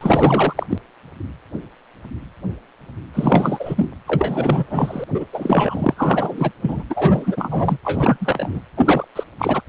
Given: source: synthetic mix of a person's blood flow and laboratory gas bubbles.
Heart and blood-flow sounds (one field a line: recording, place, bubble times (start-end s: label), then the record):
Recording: Doppler ultrasound of blood flow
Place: precordium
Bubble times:
0.01-0.54 s: bubbles
0.57-0.67 s: bubbles
0.69-0.78 s: bubbles
3.13-3.91 s: bubbles
4.07-4.64 s: bubbles
4.70-5.04 s: bubbles
5.14-5.26 s: bubbles
5.32-6.52 s: bubbles
6.62-6.83 s: bubbles
6.89-7.77 s: bubbles
7.84-8.18 s: bubbles
8.20-8.62 s: bubbles
8.77-9.05 s: bubbles
9.16-9.24 s: bubbles
9.38-9.62 s: bubbles
From the record:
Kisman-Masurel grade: 333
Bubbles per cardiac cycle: rolling drumbeat, 9 or more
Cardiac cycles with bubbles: 50 to 99%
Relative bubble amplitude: loud (0.450 to 0.775)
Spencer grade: 3 (all of the cardiac periods contain showers or single bubble signals, but not dominating or overriding the cardiac motion signals)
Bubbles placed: anywhere in the cardiac cycle